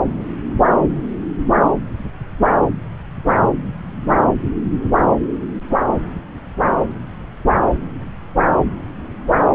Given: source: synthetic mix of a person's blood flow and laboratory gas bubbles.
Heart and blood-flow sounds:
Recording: Doppler ultrasound of blood flow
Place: subclavian vein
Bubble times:
no bubbles
From the record:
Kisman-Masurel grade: 000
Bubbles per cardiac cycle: 0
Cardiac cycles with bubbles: 0%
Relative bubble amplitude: no bubbles discernible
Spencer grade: 0 (complete lack of bubble signals)

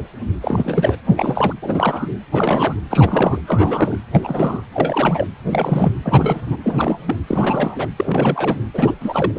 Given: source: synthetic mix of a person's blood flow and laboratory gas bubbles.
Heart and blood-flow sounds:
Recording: Doppler ultrasound of blood flow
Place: precordium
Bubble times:
0.42-0.96 s: bubbles
1.16-1.54 s: bubbles
1.62-2.09 s: bubbles
2.31-2.76 s: bubbles
2.90-3.38 s: bubbles
3.46-3.99 s: bubbles
4.12-4.62 s: bubbles
4.72-5.27 s: bubbles
5.50-5.93 s: bubbles
6.03-6.41 s: bubbles
6.46-6.56 s: bubbles
6.63-6.99 s: bubbles
7.07-7.17 s: bubbles
7.27-7.87 s: bubbles
7.97-8.57 s: bubbles
8.74-8.95 s: bubbles
9.01-9.32 s: bubbles
9.35-9.39 s: bubbles
From the record:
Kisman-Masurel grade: 332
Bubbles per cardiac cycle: rolling drumbeat, 9 or more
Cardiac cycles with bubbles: 50 to 99%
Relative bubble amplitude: moderate (0.250 to 0.450)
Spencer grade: 3 (all of the cardiac periods contain showers or single bubble signals, but not dominating or overriding the cardiac motion signals)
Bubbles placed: anywhere in the cardiac cycle

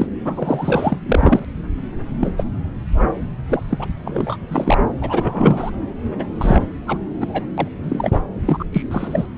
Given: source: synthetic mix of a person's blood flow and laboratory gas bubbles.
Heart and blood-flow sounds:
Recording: Doppler ultrasound of blood flow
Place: subclavian vein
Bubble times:
0.00-0.06 s: bubbles
0.25-0.98 s: bubbles
1.06-1.45 s: bubbles
2.21-2.31 s: bubbles
2.37-2.44 s: bubbles
3.13-3.16 s: bubbles
3.49-3.61 s: bubbles
3.69-3.88 s: bubbles
4.04-4.36 s: bubbles
4.47-4.78 s: bubbles
5.01-5.70 s: bubbles
6.18-6.24 s: bubbles
6.38-6.62 s: bubbles
6.86-6.98 s: bubbles
7.20-7.45 s: bubbles
7.58-7.68 s: bubbles
7.83-8.18 s: bubbles
8.46-8.65 s: bubbles
8.72-8.83 s: bubbles
8.91-9.26 s: bubbles
From the record:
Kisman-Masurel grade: 243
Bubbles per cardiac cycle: several, 3 to 8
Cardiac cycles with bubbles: 100%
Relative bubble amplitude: loud (0.450 to 0.775)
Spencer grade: 3 (all of the cardiac periods contain showers or single bubble signals, but not dominating or overriding the cardiac motion signals)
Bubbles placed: anywhere in the cardiac cycle

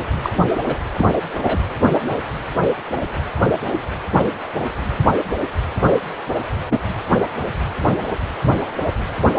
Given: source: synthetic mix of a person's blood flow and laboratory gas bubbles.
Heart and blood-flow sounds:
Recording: Doppler ultrasound of blood flow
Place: precordium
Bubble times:
0.23-0.30 s: bubbles
0.66-0.74 s: bubbles
0.98-1.06 s: bubbles
1.43-1.61 s: bubbles
6.70-6.78 s: bubbles
From the record:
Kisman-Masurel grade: 122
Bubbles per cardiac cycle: 1 to 2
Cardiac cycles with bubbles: 10 to 50%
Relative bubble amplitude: moderate (0.250 to 0.450)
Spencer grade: 2 (many but less than half of the cardiac periods contain bubble signals, singularly or in groups)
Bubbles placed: anywhere in the cardiac cycle

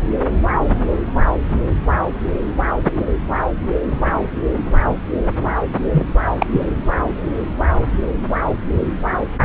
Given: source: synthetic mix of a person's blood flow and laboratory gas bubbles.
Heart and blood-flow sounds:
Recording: Doppler ultrasound of blood flow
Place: subclavian vein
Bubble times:
5.92-6.05 s: bubbles
6.40-6.46 s: bubbles
6.51-6.66 s: bubbles
From the record:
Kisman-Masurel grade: 213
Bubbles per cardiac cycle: several, 3 to 8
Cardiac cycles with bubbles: 1 to 10%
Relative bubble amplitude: loud (0.450 to 0.775)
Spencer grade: 1 (occasional bubble signal discernible with the cardiac motion signal, with majority of cardiac periods free of bubbles)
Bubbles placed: anywhere in the cardiac cycle

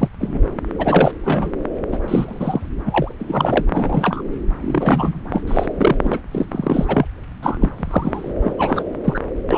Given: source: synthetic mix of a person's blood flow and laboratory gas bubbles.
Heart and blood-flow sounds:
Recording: Doppler ultrasound of blood flow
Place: subclavian vein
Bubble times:
0.00-0.08 s: bubbles
0.20-0.40 s: bubbles
0.78-1.11 s: bubbles
1.25-1.51 s: bubbles
1.92-1.98 s: bubbles
2.08-2.69 s: bubbles
2.85-3.15 s: bubbles
3.19-3.64 s: bubbles
3.71-4.21 s: bubbles
4.61-5.21 s: bubbles
5.32-5.42 s: bubbles
5.47-5.67 s: bubbles
5.77-5.96 s: bubbles
6.04-6.20 s: bubbles
6.31-6.46 s: bubbles
6.51-7.05 s: bubbles
7.42-7.57 s: bubbles
7.61-7.69 s: bubbles
7.76-8.32 s: bubbles
8.43-8.53 s: bubbles
8.58-8.83 s: bubbles
9.04-9.20 s: bubbles
9.50-9.58 s: bubbles
From the record:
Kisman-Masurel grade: 242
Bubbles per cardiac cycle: several, 3 to 8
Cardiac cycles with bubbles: 100%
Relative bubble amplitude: moderate (0.250 to 0.450)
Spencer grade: 3 (all of the cardiac periods contain showers or single bubble signals, but not dominating or overriding the cardiac motion signals)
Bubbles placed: anywhere in the cardiac cycle

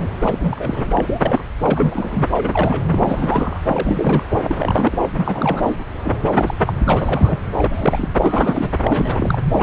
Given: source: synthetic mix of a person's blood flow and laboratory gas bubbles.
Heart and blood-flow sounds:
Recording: Doppler ultrasound of blood flow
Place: subclavian vein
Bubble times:
0.00-0.08 s: bubbles
0.21-1.43 s: bubbles
1.59-2.24 s: bubbles
2.32-2.85 s: bubbles
2.91-3.60 s: bubbles
3.68-4.34 s: bubbles
4.44-5.09 s: bubbles
5.15-5.62 s: bubbles
5.65-5.78 s: bubbles
6.04-6.17 s: bubbles
6.23-6.31 s: bubbles
6.37-6.54 s: bubbles
6.66-6.73 s: bubbles
6.83-7.38 s: bubbles
7.58-8.09 s: bubbles
8.22-8.72 s: bubbles
8.84-9.38 s: bubbles
9.51-9.63 s: bubbles
From the record:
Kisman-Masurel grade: 342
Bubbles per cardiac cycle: rolling drumbeat, 9 or more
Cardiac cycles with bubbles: 100%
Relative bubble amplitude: moderate (0.250 to 0.450)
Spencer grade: 3 (all of the cardiac periods contain showers or single bubble signals, but not dominating or overriding the cardiac motion signals)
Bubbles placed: anywhere in the cardiac cycle

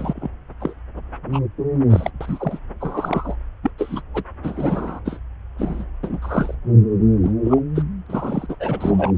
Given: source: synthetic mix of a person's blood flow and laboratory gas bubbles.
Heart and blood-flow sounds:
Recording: Doppler ultrasound of blood flow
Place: subclavian vein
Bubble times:
0.00-0.30 s: bubbles
0.60-0.73 s: bubbles
1.32-1.39 s: bubbles
1.90-2.10 s: bubbles
2.20-2.59 s: bubbles
2.80-3.35 s: bubbles
3.62-3.70 s: bubbles
3.78-4.02 s: bubbles
4.14-4.23 s: bubbles
4.43-5.00 s: bubbles
5.05-5.20 s: bubbles
5.58-5.85 s: bubbles
6.03-6.20 s: bubbles
6.22-6.54 s: bubbles
7.23-7.31 s: bubbles
7.44-7.61 s: bubbles
7.75-7.83 s: bubbles
8.06-8.46 s: bubbles
8.49-8.55 s: bubbles
8.60-9.12 s: bubbles
From the record:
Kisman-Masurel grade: 242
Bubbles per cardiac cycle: several, 3 to 8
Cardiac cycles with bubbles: 100%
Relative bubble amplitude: moderate (0.250 to 0.450)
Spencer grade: 3 (all of the cardiac periods contain showers or single bubble signals, but not dominating or overriding the cardiac motion signals)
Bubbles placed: anywhere in the cardiac cycle

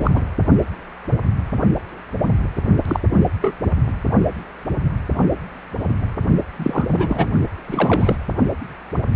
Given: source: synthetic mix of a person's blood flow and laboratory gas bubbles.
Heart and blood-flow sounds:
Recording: Doppler ultrasound of blood flow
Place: precordium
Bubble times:
0.00-0.11 s: bubbles
0.14-0.21 s: bubbles
2.88-3.00 s: bubbles
3.42-3.55 s: bubbles
6.56-7.29 s: bubbles
7.67-8.15 s: bubbles
From the record:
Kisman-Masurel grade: 222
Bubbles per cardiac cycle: several, 3 to 8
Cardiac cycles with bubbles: 10 to 50%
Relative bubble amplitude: moderate (0.250 to 0.450)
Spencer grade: 2 (many but less than half of the cardiac periods contain bubble signals, singularly or in groups)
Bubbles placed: only in the low amplitude regions of the cardiac cycle

